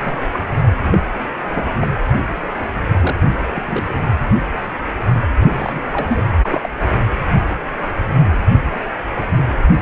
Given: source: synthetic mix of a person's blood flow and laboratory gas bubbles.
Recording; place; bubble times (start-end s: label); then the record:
Doppler ultrasound of blood flow; precordium
0.01-0.17 s: bubbles
0.33-0.48 s: bubbles
0.83-0.98 s: bubbles
1.54-1.63 s: bubbles
1.79-1.88 s: bubbles
2.60-2.65 s: bubbles
3.00-3.15 s: bubbles
3.22-3.40 s: bubbles
3.54-3.86 s: bubbles
5.59-5.81 s: bubbles
5.92-6.21 s: bubbles
6.42-6.68 s: bubbles
From the record:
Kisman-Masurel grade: 222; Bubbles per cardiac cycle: several, 3 to 8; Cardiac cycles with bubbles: 10 to 50%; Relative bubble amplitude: moderate (0.250 to 0.450); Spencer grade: 2 (many but less than half of the cardiac periods contain bubble signals, singularly or in groups); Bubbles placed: only in the low amplitude regions of the cardiac cycle